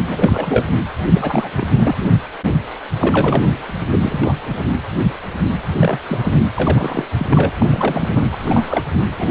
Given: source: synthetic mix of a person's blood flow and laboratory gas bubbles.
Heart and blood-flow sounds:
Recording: Doppler ultrasound of blood flow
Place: precordium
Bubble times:
0.07-0.66 s: bubbles
1.15-1.98 s: bubbles
2.98-3.54 s: bubbles
3.67-3.85 s: bubbles
3.91-4.18 s: bubbles
4.23-4.34 s: bubbles
4.45-4.65 s: bubbles
5.79-6.00 s: bubbles
6.06-6.38 s: bubbles
6.54-7.07 s: bubbles
7.17-7.26 s: bubbles
7.30-7.50 s: bubbles
7.60-7.66 s: bubbles
7.71-8.24 s: bubbles
8.31-8.82 s: bubbles
9.18-9.31 s: bubbles
From the record:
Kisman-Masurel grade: 332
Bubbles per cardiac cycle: rolling drumbeat, 9 or more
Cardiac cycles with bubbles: 50 to 99%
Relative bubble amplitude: moderate (0.250 to 0.450)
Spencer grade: 3 (all of the cardiac periods contain showers or single bubble signals, but not dominating or overriding the cardiac motion signals)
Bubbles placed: anywhere in the cardiac cycle

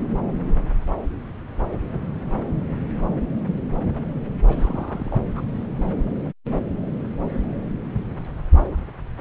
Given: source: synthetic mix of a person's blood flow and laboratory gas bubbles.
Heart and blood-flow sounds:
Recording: Doppler ultrasound of blood flow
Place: subclavian vein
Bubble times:
4.47-5.18 s: bubbles
5.35-5.42 s: bubbles
From the record:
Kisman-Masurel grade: 211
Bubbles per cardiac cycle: several, 3 to 8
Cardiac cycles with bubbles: 1 to 10%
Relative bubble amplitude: barely perceptible (0.100 to 0.250)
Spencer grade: 1 (occasional bubble signal discernible with the cardiac motion signal, with majority of cardiac periods free of bubbles)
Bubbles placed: anywhere in the cardiac cycle

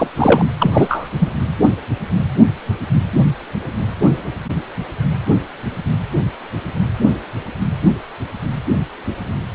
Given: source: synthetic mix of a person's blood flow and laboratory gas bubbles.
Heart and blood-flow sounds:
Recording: Doppler ultrasound of blood flow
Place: precordium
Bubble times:
0.00-0.08 s: bubbles
0.17-0.45 s: bubbles
0.59-1.09 s: bubbles
1.20-1.28 s: bubbles
From the record:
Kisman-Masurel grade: 223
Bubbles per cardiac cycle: several, 3 to 8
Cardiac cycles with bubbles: 10 to 50%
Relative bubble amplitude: loud (0.450 to 0.775)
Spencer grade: 2 (many but less than half of the cardiac periods contain bubble signals, singularly or in groups)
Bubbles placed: anywhere in the cardiac cycle

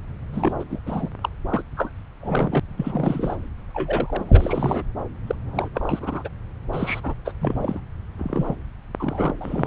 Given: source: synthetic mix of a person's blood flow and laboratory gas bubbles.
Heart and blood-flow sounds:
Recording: Doppler ultrasound of blood flow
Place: subclavian vein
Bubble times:
0.33-0.54 s: bubbles
0.59-0.64 s: bubbles
0.70-0.79 s: bubbles
0.86-1.09 s: bubbles
1.21-1.29 s: bubbles
1.48-1.62 s: bubbles
1.76-1.90 s: bubbles
2.21-2.59 s: bubbles
2.77-3.35 s: bubbles
3.74-4.83 s: bubbles
5.27-5.35 s: bubbles
5.46-5.69 s: bubbles
5.74-6.29 s: bubbles
6.73-7.01 s: bubbles
7.03-7.14 s: bubbles
7.25-7.33 s: bubbles
7.41-7.80 s: bubbles
8.19-8.56 s: bubbles
9.00-9.31 s: bubbles
9.40-9.67 s: bubbles
From the record:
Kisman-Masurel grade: 342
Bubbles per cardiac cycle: rolling drumbeat, 9 or more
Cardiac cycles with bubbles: 100%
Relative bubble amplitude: moderate (0.250 to 0.450)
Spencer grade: 3 (all of the cardiac periods contain showers or single bubble signals, but not dominating or overriding the cardiac motion signals)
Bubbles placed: anywhere in the cardiac cycle

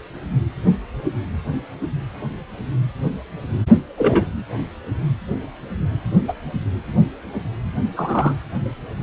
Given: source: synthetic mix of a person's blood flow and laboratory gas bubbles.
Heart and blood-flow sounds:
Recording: Doppler ultrasound of blood flow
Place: precordium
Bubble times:
3.97-4.25 s: bubbles
6.28-6.33 s: bubbles
7.97-8.34 s: bubbles
From the record:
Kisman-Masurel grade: 123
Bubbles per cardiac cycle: 1 to 2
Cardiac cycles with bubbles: 10 to 50%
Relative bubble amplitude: loud (0.450 to 0.775)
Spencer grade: 2 (many but less than half of the cardiac periods contain bubble signals, singularly or in groups)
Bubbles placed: anywhere in the cardiac cycle

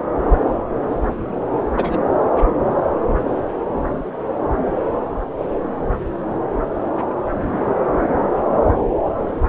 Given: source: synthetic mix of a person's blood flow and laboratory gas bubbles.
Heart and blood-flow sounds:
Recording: Doppler ultrasound of blood flow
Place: subclavian vein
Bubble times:
1.76-1.97 s: bubbles
From the record:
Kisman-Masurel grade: 113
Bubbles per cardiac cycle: 1 to 2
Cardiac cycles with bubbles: 1 to 10%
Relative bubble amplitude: loud (0.450 to 0.775)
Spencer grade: 1 (occasional bubble signal discernible with the cardiac motion signal, with majority of cardiac periods free of bubbles)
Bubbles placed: anywhere in the cardiac cycle

